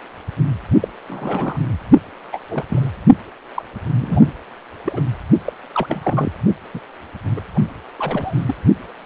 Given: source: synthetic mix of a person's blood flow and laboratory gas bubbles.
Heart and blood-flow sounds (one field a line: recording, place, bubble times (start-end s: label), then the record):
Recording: Doppler ultrasound of blood flow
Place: precordium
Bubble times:
0.80-0.88 s: bubbles
1.08-1.59 s: bubbles
2.32-2.40 s: bubbles
2.48-2.65 s: bubbles
2.69-2.88 s: bubbles
3.55-3.62 s: bubbles
3.97-4.32 s: bubbles
4.85-5.00 s: bubbles
5.45-5.52 s: bubbles
5.75-6.31 s: bubbles
6.74-6.80 s: bubbles
7.36-7.41 s: bubbles
7.54-7.61 s: bubbles
7.98-8.45 s: bubbles
8.47-8.54 s: bubbles
From the record:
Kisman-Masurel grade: 232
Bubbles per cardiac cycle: several, 3 to 8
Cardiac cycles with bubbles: 50 to 99%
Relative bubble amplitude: moderate (0.250 to 0.450)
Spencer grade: 3 (all of the cardiac periods contain showers or single bubble signals, but not dominating or overriding the cardiac motion signals)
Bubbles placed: only in the low amplitude regions of the cardiac cycle